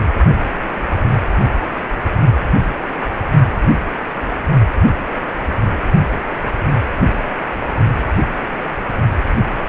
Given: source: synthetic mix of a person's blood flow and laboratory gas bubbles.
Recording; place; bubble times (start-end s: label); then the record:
Doppler ultrasound of blood flow; precordium
no bubbles
From the record:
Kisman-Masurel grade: 000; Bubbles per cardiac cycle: 0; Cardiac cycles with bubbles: 0%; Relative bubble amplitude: no bubbles discernible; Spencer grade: 0 (complete lack of bubble signals)